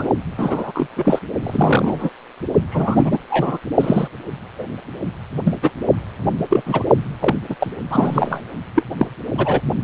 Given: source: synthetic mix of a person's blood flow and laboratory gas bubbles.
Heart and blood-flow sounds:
Doppler ultrasound of blood flow; precordium
0.00-0.08 s: bubbles
0.37-0.88 s: bubbles
0.96-1.19 s: bubbles
1.43-2.09 s: bubbles
2.71-3.19 s: bubbles
3.28-3.58 s: bubbles
3.79-4.08 s: bubbles
4.58-4.66 s: bubbles
5.45-5.55 s: bubbles
5.62-5.71 s: bubbles
6.49-6.62 s: bubbles
6.66-6.83 s: bubbles
7.20-7.36 s: bubbles
7.49-7.55 s: bubbles
7.60-7.72 s: bubbles
7.89-8.41 s: bubbles
8.76-8.83 s: bubbles
8.98-9.07 s: bubbles
9.38-9.61 s: bubbles
From the record:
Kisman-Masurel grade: 243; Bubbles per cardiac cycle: several, 3 to 8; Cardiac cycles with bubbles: 100%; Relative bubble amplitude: loud (0.450 to 0.775); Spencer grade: 3 (all of the cardiac periods contain showers or single bubble signals, but not dominating or overriding the cardiac motion signals); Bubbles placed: only in the low amplitude regions of the cardiac cycle

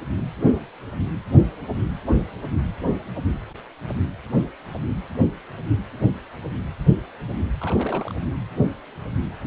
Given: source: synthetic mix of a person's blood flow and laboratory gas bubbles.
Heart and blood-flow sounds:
Doppler ultrasound of blood flow; precordium
7.60-8.13 s: bubbles
From the record:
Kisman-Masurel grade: 221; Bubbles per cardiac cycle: several, 3 to 8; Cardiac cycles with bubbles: 10 to 50%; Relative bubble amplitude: barely perceptible (0.100 to 0.250); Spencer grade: 2 (many but less than half of the cardiac periods contain bubble signals, singularly or in groups); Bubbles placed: anywhere in the cardiac cycle

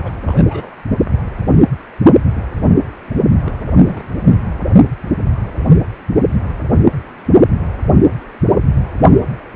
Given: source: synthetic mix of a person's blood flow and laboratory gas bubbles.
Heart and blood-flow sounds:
Doppler ultrasound of blood flow; precordium
0.00-0.12 s: bubbles
0.27-0.74 s: bubbles
3.46-3.52 s: bubbles
3.83-4.09 s: bubbles
4.25-4.38 s: bubbles
From the record:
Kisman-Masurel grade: 221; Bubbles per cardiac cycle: several, 3 to 8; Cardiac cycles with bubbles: 10 to 50%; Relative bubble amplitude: barely perceptible (0.100 to 0.250); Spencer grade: 2 (many but less than half of the cardiac periods contain bubble signals, singularly or in groups); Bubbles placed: only in the low amplitude regions of the cardiac cycle

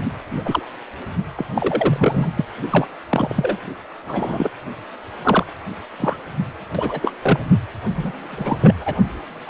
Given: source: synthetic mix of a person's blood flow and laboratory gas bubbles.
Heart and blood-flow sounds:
Doppler ultrasound of blood flow; precordium
0.30-0.41 s: bubbles
0.45-0.63 s: bubbles
1.36-1.45 s: bubbles
1.56-2.28 s: bubbles
2.35-2.45 s: bubbles
2.70-2.87 s: bubbles
3.10-3.58 s: bubbles
4.06-4.49 s: bubbles
5.23-5.44 s: bubbles
5.98-6.17 s: bubbles
6.75-7.12 s: bubbles
7.22-7.39 s: bubbles
7.95-8.12 s: bubbles
8.29-8.75 s: bubbles
8.79-8.98 s: bubbles
9.45-9.50 s: bubbles
From the record:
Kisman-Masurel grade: 243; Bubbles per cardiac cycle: several, 3 to 8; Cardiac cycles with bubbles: 100%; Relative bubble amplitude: loud (0.450 to 0.775); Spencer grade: 3 (all of the cardiac periods contain showers or single bubble signals, but not dominating or overriding the cardiac motion signals); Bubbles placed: anywhere in the cardiac cycle

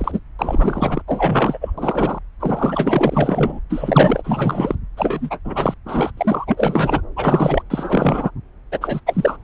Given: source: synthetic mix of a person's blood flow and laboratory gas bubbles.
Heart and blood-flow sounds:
Doppler ultrasound of blood flow; subclavian vein
0.00-0.20 s: bubbles
0.39-1.02 s: bubbles
1.07-1.58 s: bubbles
1.61-1.73 s: bubbles
1.78-2.19 s: bubbles
2.40-3.60 s: bubbles
3.69-4.75 s: bubbles
4.96-5.39 s: bubbles
5.45-5.74 s: bubbles
5.85-6.12 s: bubbles
6.17-7.02 s: bubbles
7.16-7.62 s: bubbles
7.70-8.31 s: bubbles
8.71-8.78 s: bubbles
8.81-9.00 s: bubbles
9.06-9.37 s: bubbles
From the record:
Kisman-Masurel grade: 343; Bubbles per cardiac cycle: rolling drumbeat, 9 or more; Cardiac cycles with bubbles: 100%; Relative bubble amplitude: loud (0.450 to 0.775); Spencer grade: 3 (all of the cardiac periods contain showers or single bubble signals, but not dominating or overriding the cardiac motion signals); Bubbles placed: anywhere in the cardiac cycle

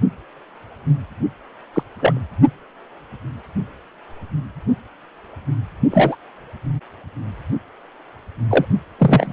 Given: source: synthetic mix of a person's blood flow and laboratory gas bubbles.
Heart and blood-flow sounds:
Doppler ultrasound of blood flow; precordium
1.74-1.83 s: bubbles
1.98-2.20 s: bubbles
5.91-6.16 s: bubbles
8.49-8.65 s: bubbles
8.98-9.33 s: bubbles
From the record:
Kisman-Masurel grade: 123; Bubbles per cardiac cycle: 1 to 2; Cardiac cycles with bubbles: 10 to 50%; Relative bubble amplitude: loud (0.450 to 0.775); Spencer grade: 2 (many but less than half of the cardiac periods contain bubble signals, singularly or in groups); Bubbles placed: only in the low amplitude regions of the cardiac cycle

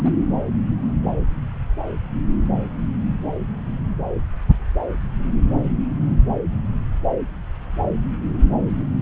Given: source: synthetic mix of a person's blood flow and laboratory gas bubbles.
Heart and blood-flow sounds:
Doppler ultrasound of blood flow; subclavian vein
0.04-0.12 s: bubbles
From the record:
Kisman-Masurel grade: 122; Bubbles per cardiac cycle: 1 to 2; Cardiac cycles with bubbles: 10 to 50%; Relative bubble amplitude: moderate (0.250 to 0.450); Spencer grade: 2 (many but less than half of the cardiac periods contain bubble signals, singularly or in groups); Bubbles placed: anywhere in the cardiac cycle

